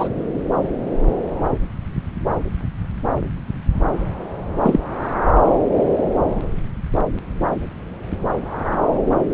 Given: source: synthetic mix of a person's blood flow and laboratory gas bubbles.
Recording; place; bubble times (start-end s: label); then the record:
Doppler ultrasound of blood flow; subclavian vein
0.00-0.09 s: bubbles
4.62-4.80 s: bubbles
From the record:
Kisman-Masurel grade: 123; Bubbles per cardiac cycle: 1 to 2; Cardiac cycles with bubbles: 10 to 50%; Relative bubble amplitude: loud (0.450 to 0.775); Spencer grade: 2 (many but less than half of the cardiac periods contain bubble signals, singularly or in groups); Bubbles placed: anywhere in the cardiac cycle